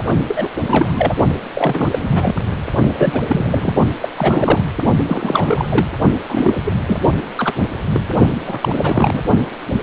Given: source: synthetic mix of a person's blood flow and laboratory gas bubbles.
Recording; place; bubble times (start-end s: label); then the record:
Doppler ultrasound of blood flow; precordium
0.27-0.50 s: bubbles
0.59-1.15 s: bubbles
1.53-1.98 s: bubbles
2.02-2.33 s: bubbles
2.95-3.21 s: bubbles
3.27-3.73 s: bubbles
4.01-4.08 s: bubbles
4.17-4.62 s: bubbles
5.08-5.87 s: bubbles
6.28-6.74 s: bubbles
6.87-6.98 s: bubbles
7.17-7.26 s: bubbles
7.36-7.54 s: bubbles
7.93-8.11 s: bubbles
8.46-9.21 s: bubbles
From the record:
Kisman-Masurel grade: 342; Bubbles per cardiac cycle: rolling drumbeat, 9 or more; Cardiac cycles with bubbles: 100%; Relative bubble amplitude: moderate (0.250 to 0.450); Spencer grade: 3 (all of the cardiac periods contain showers or single bubble signals, but not dominating or overriding the cardiac motion signals); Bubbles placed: only in the low amplitude regions of the cardiac cycle